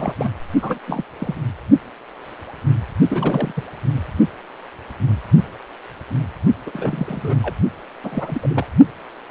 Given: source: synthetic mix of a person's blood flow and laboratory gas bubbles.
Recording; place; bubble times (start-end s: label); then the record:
Doppler ultrasound of blood flow; precordium
0.00-0.13 s: bubbles
0.18-0.28 s: bubbles
0.61-0.79 s: bubbles
0.87-1.04 s: bubbles
1.19-1.35 s: bubbles
3.09-3.52 s: bubbles
3.56-3.64 s: bubbles
6.66-7.34 s: bubbles
7.42-7.55 s: bubbles
8.03-8.66 s: bubbles
From the record:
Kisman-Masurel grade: 332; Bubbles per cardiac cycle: rolling drumbeat, 9 or more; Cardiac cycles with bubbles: 50 to 99%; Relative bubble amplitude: moderate (0.250 to 0.450); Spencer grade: 3 (all of the cardiac periods contain showers or single bubble signals, but not dominating or overriding the cardiac motion signals); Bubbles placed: only in the low amplitude regions of the cardiac cycle